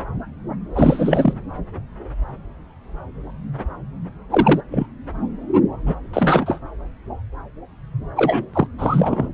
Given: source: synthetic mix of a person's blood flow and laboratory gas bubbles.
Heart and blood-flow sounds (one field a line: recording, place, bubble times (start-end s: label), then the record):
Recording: Doppler ultrasound of blood flow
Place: subclavian vein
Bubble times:
0.73-1.33 s: bubbles
4.30-4.61 s: bubbles
4.71-4.86 s: bubbles
5.86-5.95 s: bubbles
6.13-6.59 s: bubbles
8.16-8.46 s: bubbles
8.53-8.66 s: bubbles
8.78-9.28 s: bubbles
From the record:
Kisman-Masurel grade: 223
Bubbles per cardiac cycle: several, 3 to 8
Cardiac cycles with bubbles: 10 to 50%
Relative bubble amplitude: loud (0.450 to 0.775)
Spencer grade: 2 (many but less than half of the cardiac periods contain bubble signals, singularly or in groups)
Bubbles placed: anywhere in the cardiac cycle